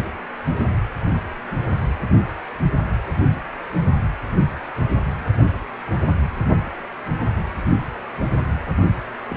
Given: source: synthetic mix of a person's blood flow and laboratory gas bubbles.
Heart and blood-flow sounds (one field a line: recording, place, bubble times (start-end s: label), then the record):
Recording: Doppler ultrasound of blood flow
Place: precordium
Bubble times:
9.29-9.37 s: bubbles
From the record:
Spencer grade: 1 (occasional bubble signal discernible with the cardiac motion signal, with majority of cardiac periods free of bubbles)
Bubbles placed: anywhere in the cardiac cycle